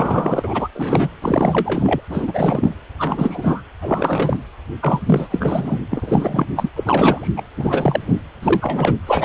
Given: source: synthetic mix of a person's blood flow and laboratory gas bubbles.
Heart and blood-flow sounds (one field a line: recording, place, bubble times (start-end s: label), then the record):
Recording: Doppler ultrasound of blood flow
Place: precordium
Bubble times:
0.00-0.68 s: bubbles
0.74-1.09 s: bubbles
1.22-2.01 s: bubbles
2.09-2.74 s: bubbles
2.97-3.62 s: bubbles
3.81-4.37 s: bubbles
4.80-5.00 s: bubbles
5.05-5.28 s: bubbles
5.30-5.79 s: bubbles
5.90-6.45 s: bubbles
6.56-6.69 s: bubbles
6.75-7.33 s: bubbles
7.37-7.42 s: bubbles
7.57-8.24 s: bubbles
8.42-8.96 s: bubbles
9.07-9.25 s: bubbles
From the record:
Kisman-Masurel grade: 343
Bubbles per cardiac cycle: rolling drumbeat, 9 or more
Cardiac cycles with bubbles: 100%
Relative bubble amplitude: loud (0.450 to 0.775)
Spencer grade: 3 (all of the cardiac periods contain showers or single bubble signals, but not dominating or overriding the cardiac motion signals)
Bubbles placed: anywhere in the cardiac cycle